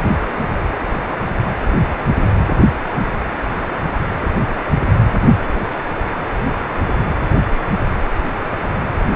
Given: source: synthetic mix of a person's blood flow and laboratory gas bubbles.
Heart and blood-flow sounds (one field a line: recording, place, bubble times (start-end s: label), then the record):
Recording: Doppler ultrasound of blood flow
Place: precordium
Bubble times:
no bubbles
From the record:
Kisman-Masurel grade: 000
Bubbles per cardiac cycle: 0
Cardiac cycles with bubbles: 0%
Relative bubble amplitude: no bubbles discernible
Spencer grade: 0 (complete lack of bubble signals)